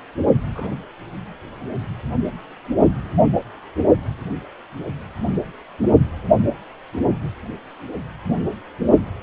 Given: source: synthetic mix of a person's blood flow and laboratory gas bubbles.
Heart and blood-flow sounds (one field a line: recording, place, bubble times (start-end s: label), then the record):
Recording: Doppler ultrasound of blood flow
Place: precordium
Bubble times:
0.49-0.77 s: bubbles
From the record:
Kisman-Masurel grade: 111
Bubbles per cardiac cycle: 1 to 2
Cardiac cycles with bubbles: 1 to 10%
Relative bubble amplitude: barely perceptible (0.100 to 0.250)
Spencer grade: 1 (occasional bubble signal discernible with the cardiac motion signal, with majority of cardiac periods free of bubbles)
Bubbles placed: only in the low amplitude regions of the cardiac cycle